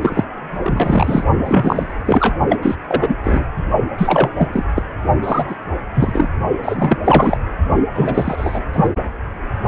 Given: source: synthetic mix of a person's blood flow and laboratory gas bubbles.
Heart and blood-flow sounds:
Doppler ultrasound of blood flow; precordium
0.01-0.24 s: bubbles
0.62-1.24 s: bubbles
1.45-1.94 s: bubbles
2.05-2.35 s: bubbles
2.49-2.58 s: bubbles
2.62-2.75 s: bubbles
2.88-3.17 s: bubbles
3.24-3.44 s: bubbles
3.98-4.29 s: bubbles
4.36-4.49 s: bubbles
4.53-4.63 s: bubbles
4.75-4.83 s: bubbles
5.23-5.44 s: bubbles
5.48-5.55 s: bubbles
5.94-6.29 s: bubbles
6.62-6.99 s: bubbles
7.04-7.38 s: bubbles
7.94-8.62 s: bubbles
8.73-8.88 s: bubbles
From the record:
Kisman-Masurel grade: 343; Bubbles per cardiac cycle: rolling drumbeat, 9 or more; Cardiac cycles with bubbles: 100%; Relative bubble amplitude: loud (0.450 to 0.775); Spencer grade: 3 (all of the cardiac periods contain showers or single bubble signals, but not dominating or overriding the cardiac motion signals); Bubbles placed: only in the low amplitude regions of the cardiac cycle

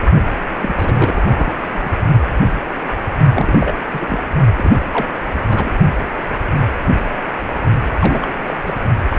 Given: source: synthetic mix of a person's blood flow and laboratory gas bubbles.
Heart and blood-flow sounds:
Doppler ultrasound of blood flow; precordium
0.58-1.54 s: bubbles
1.71-1.93 s: bubbles
3.33-3.75 s: bubbles
3.91-4.06 s: bubbles
4.09-4.18 s: bubbles
4.57-4.84 s: bubbles
4.93-5.09 s: bubbles
5.49-5.71 s: bubbles
7.91-7.95 s: bubbles
7.99-8.39 s: bubbles
8.46-8.54 s: bubbles
8.64-8.77 s: bubbles
9.11-9.19 s: bubbles
From the record:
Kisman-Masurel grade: 332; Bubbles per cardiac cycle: rolling drumbeat, 9 or more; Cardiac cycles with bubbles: 50 to 99%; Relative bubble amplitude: moderate (0.250 to 0.450); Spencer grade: 3 (all of the cardiac periods contain showers or single bubble signals, but not dominating or overriding the cardiac motion signals); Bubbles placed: only in the low amplitude regions of the cardiac cycle

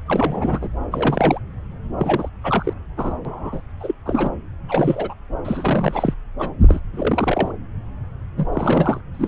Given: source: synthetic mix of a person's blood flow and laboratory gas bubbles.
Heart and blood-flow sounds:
Doppler ultrasound of blood flow; subclavian vein
0.06-0.68 s: bubbles
0.91-1.40 s: bubbles
1.99-2.29 s: bubbles
2.44-2.73 s: bubbles
2.97-3.14 s: bubbles
3.25-3.62 s: bubbles
3.80-3.95 s: bubbles
4.05-4.29 s: bubbles
4.68-5.14 s: bubbles
5.44-6.14 s: bubbles
6.38-6.51 s: bubbles
6.60-6.80 s: bubbles
6.93-7.51 s: bubbles
8.37-8.46 s: bubbles
8.53-9.01 s: bubbles
9.13-9.27 s: bubbles
From the record:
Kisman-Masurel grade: 332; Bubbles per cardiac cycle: rolling drumbeat, 9 or more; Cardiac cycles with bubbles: 50 to 99%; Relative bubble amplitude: moderate (0.250 to 0.450); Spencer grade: 3 (all of the cardiac periods contain showers or single bubble signals, but not dominating or overriding the cardiac motion signals); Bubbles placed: anywhere in the cardiac cycle

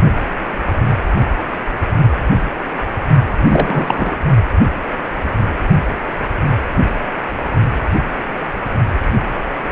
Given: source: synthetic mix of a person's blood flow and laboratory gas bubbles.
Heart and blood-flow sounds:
Doppler ultrasound of blood flow; precordium
3.48-4.17 s: bubbles
From the record:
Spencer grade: 1 (occasional bubble signal discernible with the cardiac motion signal, with majority of cardiac periods free of bubbles); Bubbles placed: only in the low amplitude regions of the cardiac cycle

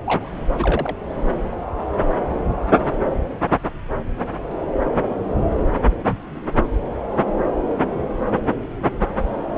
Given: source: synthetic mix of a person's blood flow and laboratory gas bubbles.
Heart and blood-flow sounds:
Doppler ultrasound of blood flow; subclavian vein
0.05-0.29 s: bubbles
0.57-0.95 s: bubbles
From the record:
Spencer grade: 1 (occasional bubble signal discernible with the cardiac motion signal, with majority of cardiac periods free of bubbles); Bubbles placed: anywhere in the cardiac cycle

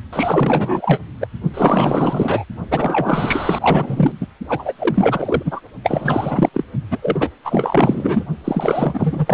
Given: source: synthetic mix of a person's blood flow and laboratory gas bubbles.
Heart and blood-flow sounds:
Doppler ultrasound of blood flow; precordium
0.12-0.99 s: bubbles
1.20-1.28 s: bubbles
1.54-2.44 s: bubbles
2.70-4.12 s: bubbles
4.20-4.27 s: bubbles
4.48-4.72 s: bubbles
4.79-5.61 s: bubbles
5.83-6.50 s: bubbles
6.53-6.64 s: bubbles
6.90-6.99 s: bubbles
7.01-7.29 s: bubbles
7.44-8.24 s: bubbles
8.44-9.34 s: bubbles
From the record:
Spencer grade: 4 (maximum detectable bubble signal sounding continuously throughout systole and diastole of every cardiac period, and overriding the amplitude of the normal cardiac signals); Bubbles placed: only in the low amplitude regions of the cardiac cycle

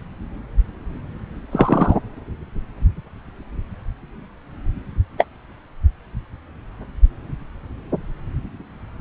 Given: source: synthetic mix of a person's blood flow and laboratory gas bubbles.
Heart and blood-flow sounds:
Doppler ultrasound of blood flow; subclavian vein
1.51-1.96 s: bubbles
5.17-5.25 s: bubbles
From the record:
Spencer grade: 2 (many but less than half of the cardiac periods contain bubble signals, singularly or in groups); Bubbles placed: anywhere in the cardiac cycle

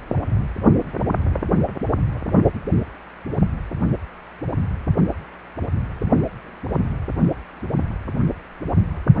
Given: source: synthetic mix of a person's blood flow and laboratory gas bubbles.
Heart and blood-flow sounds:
Doppler ultrasound of blood flow; precordium
no bubbles
From the record:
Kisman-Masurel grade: 000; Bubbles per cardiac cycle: 0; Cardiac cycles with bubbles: 0%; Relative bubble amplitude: no bubbles discernible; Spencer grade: 0 (complete lack of bubble signals)

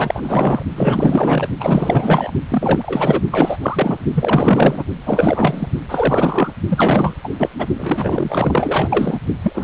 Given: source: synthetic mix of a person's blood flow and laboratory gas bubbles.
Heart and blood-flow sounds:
Doppler ultrasound of blood flow; precordium
0.00-0.62 s: bubbles
0.75-1.48 s: bubbles
1.60-2.31 s: bubbles
2.49-3.22 s: bubbles
3.31-3.58 s: bubbles
3.62-3.98 s: bubbles
4.14-4.83 s: bubbles
5.05-5.67 s: bubbles
5.88-6.53 s: bubbles
6.69-7.14 s: bubbles
7.23-7.29 s: bubbles
7.39-7.50 s: bubbles
7.58-7.66 s: bubbles
7.77-9.19 s: bubbles
9.43-9.64 s: bubbles
From the record:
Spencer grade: 4 (maximum detectable bubble signal sounding continuously throughout systole and diastole of every cardiac period, and overriding the amplitude of the normal cardiac signals); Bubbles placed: only in the low amplitude regions of the cardiac cycle

